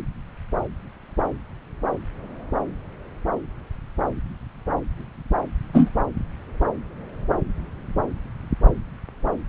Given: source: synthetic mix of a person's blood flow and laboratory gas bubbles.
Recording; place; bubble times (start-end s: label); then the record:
Doppler ultrasound of blood flow; subclavian vein
5.73-5.90 s: bubbles
From the record:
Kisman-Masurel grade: 113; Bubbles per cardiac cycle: 1 to 2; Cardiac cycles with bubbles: 1 to 10%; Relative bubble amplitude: loud (0.450 to 0.775); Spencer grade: 1 (occasional bubble signal discernible with the cardiac motion signal, with majority of cardiac periods free of bubbles); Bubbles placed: anywhere in the cardiac cycle